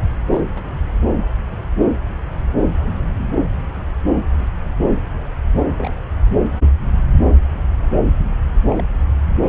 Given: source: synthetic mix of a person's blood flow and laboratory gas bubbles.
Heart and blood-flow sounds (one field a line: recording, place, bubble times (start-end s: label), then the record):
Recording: Doppler ultrasound of blood flow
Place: subclavian vein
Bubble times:
0.32-0.41 s: bubbles
0.56-0.61 s: bubbles
5.77-5.94 s: bubbles
8.70-8.83 s: bubbles
From the record:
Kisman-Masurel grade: 121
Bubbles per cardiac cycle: 1 to 2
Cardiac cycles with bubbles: 10 to 50%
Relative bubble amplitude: barely perceptible (0.100 to 0.250)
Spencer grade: 2 (many but less than half of the cardiac periods contain bubble signals, singularly or in groups)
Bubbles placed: anywhere in the cardiac cycle